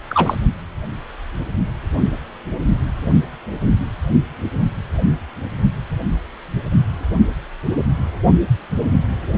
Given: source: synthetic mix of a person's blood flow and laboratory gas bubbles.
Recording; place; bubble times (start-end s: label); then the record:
Doppler ultrasound of blood flow; precordium
0.09-0.35 s: bubbles
From the record:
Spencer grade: 2 (many but less than half of the cardiac periods contain bubble signals, singularly or in groups); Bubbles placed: only in the low amplitude regions of the cardiac cycle